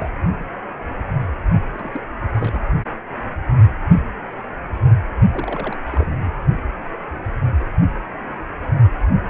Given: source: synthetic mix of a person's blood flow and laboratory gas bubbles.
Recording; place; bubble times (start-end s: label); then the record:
Doppler ultrasound of blood flow; precordium
0.00-0.10 s: bubbles
1.73-2.02 s: bubbles
2.29-2.62 s: bubbles
5.32-5.77 s: bubbles
5.85-6.30 s: bubbles
From the record:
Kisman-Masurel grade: 221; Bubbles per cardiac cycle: several, 3 to 8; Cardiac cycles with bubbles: 10 to 50%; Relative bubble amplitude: barely perceptible (0.100 to 0.250); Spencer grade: 2 (many but less than half of the cardiac periods contain bubble signals, singularly or in groups); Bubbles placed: only in the low amplitude regions of the cardiac cycle